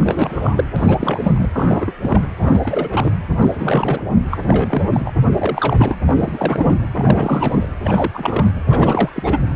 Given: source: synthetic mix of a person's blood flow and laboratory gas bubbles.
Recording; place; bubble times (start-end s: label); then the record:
Doppler ultrasound of blood flow; precordium
0.00-0.64 s: bubbles
0.76-1.50 s: bubbles
1.53-1.93 s: bubbles
2.02-2.27 s: bubbles
2.41-3.10 s: bubbles
3.39-4.01 s: bubbles
4.30-4.82 s: bubbles
4.92-5.11 s: bubbles
5.37-5.95 s: bubbles
6.06-6.75 s: bubbles
6.93-7.68 s: bubbles
7.84-8.10 s: bubbles
8.13-8.51 s: bubbles
8.67-9.09 s: bubbles
9.16-9.41 s: bubbles
From the record:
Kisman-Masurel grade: 342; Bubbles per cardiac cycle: rolling drumbeat, 9 or more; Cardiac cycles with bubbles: 100%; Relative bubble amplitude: moderate (0.250 to 0.450); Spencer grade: 3 (all of the cardiac periods contain showers or single bubble signals, but not dominating or overriding the cardiac motion signals); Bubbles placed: anywhere in the cardiac cycle